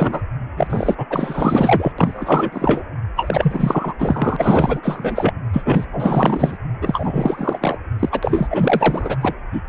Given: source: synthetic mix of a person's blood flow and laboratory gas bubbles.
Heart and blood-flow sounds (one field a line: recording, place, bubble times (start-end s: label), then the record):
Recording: Doppler ultrasound of blood flow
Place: precordium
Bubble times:
0.00-0.21 s: bubbles
0.56-0.95 s: bubbles
0.97-1.06 s: bubbles
1.10-1.93 s: bubbles
1.98-2.84 s: bubbles
3.16-3.94 s: bubbles
3.98-5.33 s: bubbles
5.53-5.86 s: bubbles
5.92-6.58 s: bubbles
6.82-7.58 s: bubbles
7.61-7.78 s: bubbles
7.99-8.20 s: bubbles
8.22-8.47 s: bubbles
8.50-9.17 s: bubbles
9.21-9.34 s: bubbles
9.52-9.62 s: bubbles
From the record:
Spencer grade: 4 (maximum detectable bubble signal sounding continuously throughout systole and diastole of every cardiac period, and overriding the amplitude of the normal cardiac signals)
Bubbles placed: anywhere in the cardiac cycle